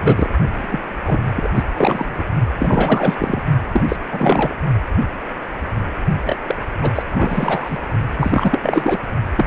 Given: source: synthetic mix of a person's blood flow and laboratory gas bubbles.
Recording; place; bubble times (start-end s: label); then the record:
Doppler ultrasound of blood flow; precordium
0.00-0.30 s: bubbles
0.53-0.80 s: bubbles
1.06-1.20 s: bubbles
1.36-1.49 s: bubbles
1.54-1.65 s: bubbles
1.76-2.25 s: bubbles
2.58-3.42 s: bubbles
3.73-3.83 s: bubbles
3.88-3.96 s: bubbles
4.12-4.55 s: bubbles
6.25-6.36 s: bubbles
6.47-6.56 s: bubbles
6.81-6.91 s: bubbles
6.95-7.03 s: bubbles
7.11-7.79 s: bubbles
8.17-8.99 s: bubbles
9.35-9.47 s: bubbles
From the record:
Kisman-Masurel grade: 333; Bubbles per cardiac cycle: rolling drumbeat, 9 or more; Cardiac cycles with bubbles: 50 to 99%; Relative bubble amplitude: loud (0.450 to 0.775); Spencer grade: 3 (all of the cardiac periods contain showers or single bubble signals, but not dominating or overriding the cardiac motion signals); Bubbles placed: only in the low amplitude regions of the cardiac cycle